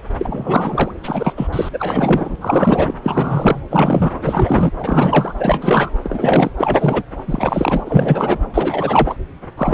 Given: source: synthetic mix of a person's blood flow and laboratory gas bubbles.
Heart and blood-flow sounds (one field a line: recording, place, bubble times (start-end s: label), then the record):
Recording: Doppler ultrasound of blood flow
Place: subclavian vein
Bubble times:
0.18-0.92 s: bubbles
1.03-1.33 s: bubbles
1.37-1.48 s: bubbles
1.52-1.69 s: bubbles
1.73-2.36 s: bubbles
2.41-2.93 s: bubbles
3.03-3.60 s: bubbles
3.70-4.12 s: bubbles
4.21-4.71 s: bubbles
4.79-5.33 s: bubbles
5.39-5.91 s: bubbles
6.04-6.50 s: bubbles
6.58-7.03 s: bubbles
7.28-7.81 s: bubbles
7.85-8.38 s: bubbles
8.54-9.17 s: bubbles
9.57-9.74 s: bubbles
From the record:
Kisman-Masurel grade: 343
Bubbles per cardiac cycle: rolling drumbeat, 9 or more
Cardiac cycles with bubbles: 100%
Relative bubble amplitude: loud (0.450 to 0.775)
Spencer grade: 3 (all of the cardiac periods contain showers or single bubble signals, but not dominating or overriding the cardiac motion signals)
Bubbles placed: anywhere in the cardiac cycle